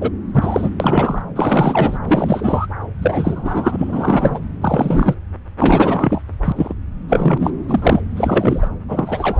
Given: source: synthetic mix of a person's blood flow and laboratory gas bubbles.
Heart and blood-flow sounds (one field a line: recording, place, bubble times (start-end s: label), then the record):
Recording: Doppler ultrasound of blood flow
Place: subclavian vein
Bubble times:
0.00-0.10 s: bubbles
0.33-0.69 s: bubbles
0.80-1.22 s: bubbles
1.35-1.98 s: bubbles
2.07-2.66 s: bubbles
3.00-4.39 s: bubbles
4.61-5.15 s: bubbles
5.58-6.21 s: bubbles
6.44-6.52 s: bubbles
6.55-6.74 s: bubbles
7.08-7.50 s: bubbles
7.68-8.01 s: bubbles
8.17-8.69 s: bubbles
8.88-9.39 s: bubbles
From the record:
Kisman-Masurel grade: 343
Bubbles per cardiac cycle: rolling drumbeat, 9 or more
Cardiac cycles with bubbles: 100%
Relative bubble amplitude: loud (0.450 to 0.775)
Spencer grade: 3 (all of the cardiac periods contain showers or single bubble signals, but not dominating or overriding the cardiac motion signals)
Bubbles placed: anywhere in the cardiac cycle